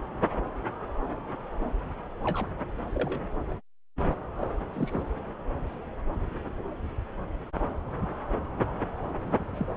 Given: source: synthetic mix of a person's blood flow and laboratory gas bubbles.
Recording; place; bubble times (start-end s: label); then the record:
Doppler ultrasound of blood flow; subclavian vein
2.24-2.46 s: bubbles
2.94-3.21 s: bubbles
4.39-4.47 s: bubbles
4.73-5.03 s: bubbles
9.36-9.45 s: bubbles
9.49-9.66 s: bubbles
From the record:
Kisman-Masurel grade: 121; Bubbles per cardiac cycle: 1 to 2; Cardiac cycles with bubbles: 10 to 50%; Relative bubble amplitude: barely perceptible (0.100 to 0.250); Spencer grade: 2 (many but less than half of the cardiac periods contain bubble signals, singularly or in groups); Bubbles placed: anywhere in the cardiac cycle